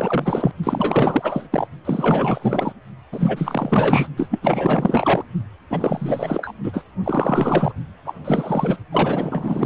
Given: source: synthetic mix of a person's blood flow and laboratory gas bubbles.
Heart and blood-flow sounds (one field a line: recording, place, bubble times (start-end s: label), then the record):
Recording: Doppler ultrasound of blood flow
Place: precordium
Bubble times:
0.00-0.51 s: bubbles
0.63-1.48 s: bubbles
1.52-1.67 s: bubbles
1.84-2.72 s: bubbles
3.12-4.08 s: bubbles
4.17-4.39 s: bubbles
4.42-5.23 s: bubbles
5.70-6.52 s: bubbles
6.63-6.84 s: bubbles
7.04-7.72 s: bubbles
8.05-8.14 s: bubbles
8.25-8.77 s: bubbles
8.92-9.65 s: bubbles
From the record:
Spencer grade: 4 (maximum detectable bubble signal sounding continuously throughout systole and diastole of every cardiac period, and overriding the amplitude of the normal cardiac signals)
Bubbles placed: only in the low amplitude regions of the cardiac cycle